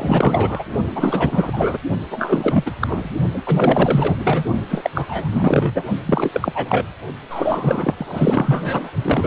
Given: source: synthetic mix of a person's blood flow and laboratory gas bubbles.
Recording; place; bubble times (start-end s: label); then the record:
Doppler ultrasound of blood flow; precordium
0.00-0.64 s: bubbles
0.95-1.77 s: bubbles
2.10-2.72 s: bubbles
2.81-3.10 s: bubbles
3.33-3.42 s: bubbles
3.46-4.44 s: bubbles
4.69-4.90 s: bubbles
4.94-5.85 s: bubbles
6.06-6.87 s: bubbles
7.29-8.91 s: bubbles
9.04-9.27 s: bubbles
From the record:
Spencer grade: 4 (maximum detectable bubble signal sounding continuously throughout systole and diastole of every cardiac period, and overriding the amplitude of the normal cardiac signals); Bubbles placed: only in the low amplitude regions of the cardiac cycle